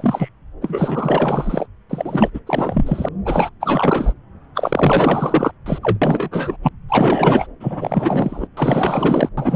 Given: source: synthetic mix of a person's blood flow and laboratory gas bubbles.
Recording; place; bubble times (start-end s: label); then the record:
Doppler ultrasound of blood flow; subclavian vein
0.00-0.29 s: bubbles
0.61-1.68 s: bubbles
1.90-2.30 s: bubbles
2.33-2.40 s: bubbles
2.46-3.08 s: bubbles
3.25-3.50 s: bubbles
3.60-4.14 s: bubbles
4.55-5.53 s: bubbles
5.66-5.79 s: bubbles
5.82-5.98 s: bubbles
6.02-6.57 s: bubbles
6.62-6.69 s: bubbles
6.89-7.47 s: bubbles
7.60-8.47 s: bubbles
8.57-9.29 s: bubbles
9.37-9.55 s: bubbles
From the record:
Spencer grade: 4 (maximum detectable bubble signal sounding continuously throughout systole and diastole of every cardiac period, and overriding the amplitude of the normal cardiac signals); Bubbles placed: anywhere in the cardiac cycle